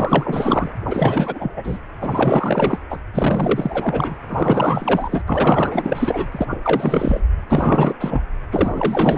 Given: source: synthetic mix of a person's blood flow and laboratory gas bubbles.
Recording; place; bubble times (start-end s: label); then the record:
Doppler ultrasound of blood flow; precordium
0.00-0.72 s: bubbles
0.86-1.78 s: bubbles
1.99-2.79 s: bubbles
2.90-2.99 s: bubbles
3.13-4.17 s: bubbles
4.29-5.25 s: bubbles
5.27-6.29 s: bubbles
6.31-6.46 s: bubbles
6.50-6.58 s: bubbles
6.62-7.22 s: bubbles
7.49-7.94 s: bubbles
8.00-8.21 s: bubbles
8.51-9.17 s: bubbles
From the record:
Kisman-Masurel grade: 444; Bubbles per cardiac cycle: continuous sound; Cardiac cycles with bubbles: 100%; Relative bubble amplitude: maximal (0.775 to 0.999); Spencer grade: 4 (maximum detectable bubble signal sounding continuously throughout systole and diastole of every cardiac period, and overriding the amplitude of the normal cardiac signals); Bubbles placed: anywhere in the cardiac cycle